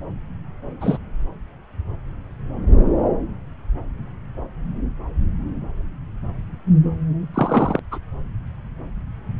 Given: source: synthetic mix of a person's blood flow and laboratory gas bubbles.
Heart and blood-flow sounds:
Doppler ultrasound of blood flow; subclavian vein
0.81-0.97 s: bubbles
7.34-7.79 s: bubbles
7.91-7.99 s: bubbles
From the record:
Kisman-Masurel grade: 123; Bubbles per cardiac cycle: 1 to 2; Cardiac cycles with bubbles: 10 to 50%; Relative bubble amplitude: loud (0.450 to 0.775); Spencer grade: 2 (many but less than half of the cardiac periods contain bubble signals, singularly or in groups); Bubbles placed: anywhere in the cardiac cycle

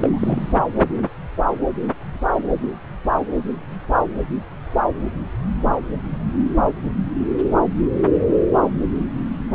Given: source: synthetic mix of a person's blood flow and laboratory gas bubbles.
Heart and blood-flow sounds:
Doppler ultrasound of blood flow; subclavian vein
0.00-0.53 s: bubbles
From the record:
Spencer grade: 1 (occasional bubble signal discernible with the cardiac motion signal, with majority of cardiac periods free of bubbles); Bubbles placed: anywhere in the cardiac cycle

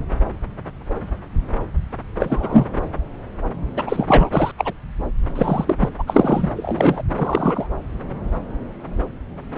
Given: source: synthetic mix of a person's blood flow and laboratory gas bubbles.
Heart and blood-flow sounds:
Doppler ultrasound of blood flow; subclavian vein
2.20-2.67 s: bubbles
3.76-3.83 s: bubbles
3.86-4.29 s: bubbles
4.33-4.51 s: bubbles
4.58-4.73 s: bubbles
5.35-5.76 s: bubbles
5.79-5.89 s: bubbles
5.98-6.04 s: bubbles
6.06-6.50 s: bubbles
6.56-7.02 s: bubbles
7.16-7.67 s: bubbles
From the record:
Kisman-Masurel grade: 233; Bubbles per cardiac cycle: several, 3 to 8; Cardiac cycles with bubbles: 50 to 99%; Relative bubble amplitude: loud (0.450 to 0.775); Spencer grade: 3 (all of the cardiac periods contain showers or single bubble signals, but not dominating or overriding the cardiac motion signals); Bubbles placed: anywhere in the cardiac cycle

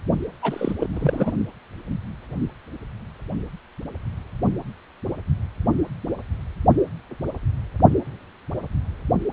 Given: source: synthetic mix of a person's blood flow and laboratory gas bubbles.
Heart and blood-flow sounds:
Doppler ultrasound of blood flow; precordium
0.42-0.75 s: bubbles
0.80-0.87 s: bubbles
0.93-1.32 s: bubbles
From the record:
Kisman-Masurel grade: 222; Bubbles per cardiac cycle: several, 3 to 8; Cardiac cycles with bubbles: 10 to 50%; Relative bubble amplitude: moderate (0.250 to 0.450); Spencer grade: 2 (many but less than half of the cardiac periods contain bubble signals, singularly or in groups); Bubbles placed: only in the low amplitude regions of the cardiac cycle

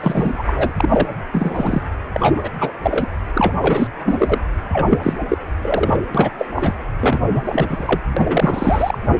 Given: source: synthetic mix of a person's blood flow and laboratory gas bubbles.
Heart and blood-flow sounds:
Doppler ultrasound of blood flow; precordium
0.00-0.43 s: bubbles
0.46-0.73 s: bubbles
0.78-1.09 s: bubbles
1.32-1.83 s: bubbles
2.12-2.50 s: bubbles
2.60-2.73 s: bubbles
2.82-3.15 s: bubbles
3.35-3.53 s: bubbles
3.62-3.88 s: bubbles
4.04-4.39 s: bubbles
4.73-5.13 s: bubbles
5.28-5.38 s: bubbles
5.62-5.99 s: bubbles
6.15-6.30 s: bubbles
6.38-6.48 s: bubbles
6.55-6.75 s: bubbles
7.00-7.20 s: bubbles
7.34-7.42 s: bubbles
7.45-8.00 s: bubbles
8.17-8.98 s: bubbles
From the record:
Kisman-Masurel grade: 343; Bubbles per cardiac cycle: rolling drumbeat, 9 or more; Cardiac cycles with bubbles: 100%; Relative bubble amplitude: loud (0.450 to 0.775); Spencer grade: 3 (all of the cardiac periods contain showers or single bubble signals, but not dominating or overriding the cardiac motion signals); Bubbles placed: anywhere in the cardiac cycle

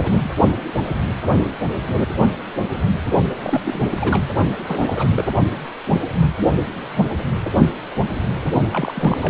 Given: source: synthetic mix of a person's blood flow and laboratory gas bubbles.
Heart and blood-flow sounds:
Doppler ultrasound of blood flow; precordium
0.00-0.32 s: bubbles
3.29-3.33 s: bubbles
3.43-3.60 s: bubbles
3.64-3.84 s: bubbles
3.96-4.25 s: bubbles
4.64-5.27 s: bubbles
8.72-9.18 s: bubbles
9.22-9.30 s: bubbles
From the record:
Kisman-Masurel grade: 332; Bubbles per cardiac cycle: rolling drumbeat, 9 or more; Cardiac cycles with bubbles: 50 to 99%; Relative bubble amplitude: moderate (0.250 to 0.450); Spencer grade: 3 (all of the cardiac periods contain showers or single bubble signals, but not dominating or overriding the cardiac motion signals); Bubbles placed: only in the low amplitude regions of the cardiac cycle

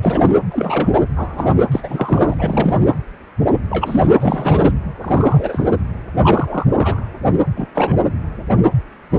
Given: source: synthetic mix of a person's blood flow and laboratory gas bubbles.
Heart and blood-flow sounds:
Doppler ultrasound of blood flow; precordium
0.03-0.30 s: bubbles
0.51-0.89 s: bubbles
1.16-1.53 s: bubbles
1.72-2.34 s: bubbles
2.38-2.79 s: bubbles
3.70-4.07 s: bubbles
4.19-4.72 s: bubbles
5.01-5.67 s: bubbles
6.22-6.65 s: bubbles
6.68-7.08 s: bubbles
7.56-7.68 s: bubbles
7.74-7.94 s: bubbles
From the record:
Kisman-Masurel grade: 233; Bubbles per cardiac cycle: several, 3 to 8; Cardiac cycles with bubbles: 50 to 99%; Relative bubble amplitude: loud (0.450 to 0.775); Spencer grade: 3 (all of the cardiac periods contain showers or single bubble signals, but not dominating or overriding the cardiac motion signals); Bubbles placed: anywhere in the cardiac cycle

